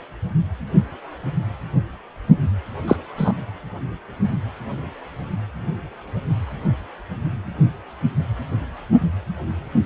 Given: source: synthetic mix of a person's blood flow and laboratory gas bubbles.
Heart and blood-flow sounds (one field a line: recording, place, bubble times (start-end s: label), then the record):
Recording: Doppler ultrasound of blood flow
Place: precordium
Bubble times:
2.88-2.96 s: bubbles
3.17-3.32 s: bubbles
From the record:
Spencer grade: 2 (many but less than half of the cardiac periods contain bubble signals, singularly or in groups)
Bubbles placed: anywhere in the cardiac cycle